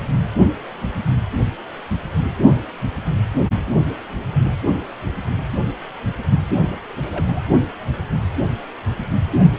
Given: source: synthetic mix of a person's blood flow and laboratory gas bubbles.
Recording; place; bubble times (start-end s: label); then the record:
Doppler ultrasound of blood flow; precordium
6.54-6.75 s: bubbles
7.05-7.42 s: bubbles
From the record:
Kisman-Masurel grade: 211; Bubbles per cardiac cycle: several, 3 to 8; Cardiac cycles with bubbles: 1 to 10%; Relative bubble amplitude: barely perceptible (0.100 to 0.250); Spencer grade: 1 (occasional bubble signal discernible with the cardiac motion signal, with majority of cardiac periods free of bubbles); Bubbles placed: only in the low amplitude regions of the cardiac cycle